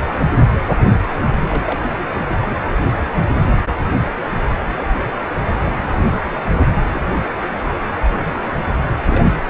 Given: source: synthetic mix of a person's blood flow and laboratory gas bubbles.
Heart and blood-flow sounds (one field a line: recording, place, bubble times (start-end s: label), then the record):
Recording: Doppler ultrasound of blood flow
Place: precordium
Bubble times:
1.49-1.79 s: bubbles
5.79-5.87 s: bubbles
6.92-7.01 s: bubbles
7.40-7.46 s: bubbles
8.14-8.33 s: bubbles
8.69-8.80 s: bubbles
9.10-9.27 s: bubbles
9.36-9.43 s: bubbles
From the record:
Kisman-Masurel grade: 121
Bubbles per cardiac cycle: 1 to 2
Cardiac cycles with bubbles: 10 to 50%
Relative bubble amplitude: barely perceptible (0.100 to 0.250)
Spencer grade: 2 (many but less than half of the cardiac periods contain bubble signals, singularly or in groups)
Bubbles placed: anywhere in the cardiac cycle